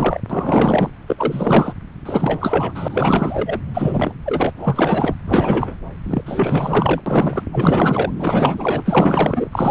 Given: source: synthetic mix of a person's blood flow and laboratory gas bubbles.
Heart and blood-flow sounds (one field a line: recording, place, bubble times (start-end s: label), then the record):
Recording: Doppler ultrasound of blood flow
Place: subclavian vein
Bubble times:
0.00-0.22 s: bubbles
0.30-0.90 s: bubbles
1.07-1.73 s: bubbles
2.05-3.60 s: bubbles
3.74-4.13 s: bubbles
4.25-4.52 s: bubbles
4.55-5.14 s: bubbles
5.23-5.76 s: bubbles
6.04-6.22 s: bubbles
6.25-7.01 s: bubbles
7.06-7.43 s: bubbles
7.52-8.12 s: bubbles
8.19-9.71 s: bubbles
From the record:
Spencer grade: 4 (maximum detectable bubble signal sounding continuously throughout systole and diastole of every cardiac period, and overriding the amplitude of the normal cardiac signals)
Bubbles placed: anywhere in the cardiac cycle